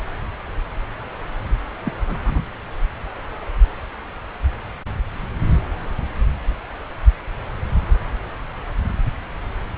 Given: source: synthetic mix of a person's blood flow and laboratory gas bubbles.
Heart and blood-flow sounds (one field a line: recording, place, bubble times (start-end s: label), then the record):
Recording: Doppler ultrasound of blood flow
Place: subclavian vein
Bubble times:
1.83-1.94 s: bubbles
2.08-2.17 s: bubbles
2.25-2.45 s: bubbles
From the record:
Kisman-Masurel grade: 211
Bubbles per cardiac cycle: several, 3 to 8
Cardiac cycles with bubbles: 1 to 10%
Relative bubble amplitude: barely perceptible (0.100 to 0.250)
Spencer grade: 1 (occasional bubble signal discernible with the cardiac motion signal, with majority of cardiac periods free of bubbles)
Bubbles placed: anywhere in the cardiac cycle